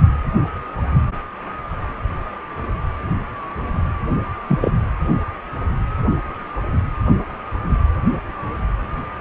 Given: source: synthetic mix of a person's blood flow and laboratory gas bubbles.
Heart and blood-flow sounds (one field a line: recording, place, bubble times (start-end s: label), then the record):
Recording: Doppler ultrasound of blood flow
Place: precordium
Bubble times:
4.48-4.72 s: bubbles
From the record:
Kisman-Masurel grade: 113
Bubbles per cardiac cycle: 1 to 2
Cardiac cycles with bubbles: 1 to 10%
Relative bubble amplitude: loud (0.450 to 0.775)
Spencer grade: 1 (occasional bubble signal discernible with the cardiac motion signal, with majority of cardiac periods free of bubbles)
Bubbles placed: anywhere in the cardiac cycle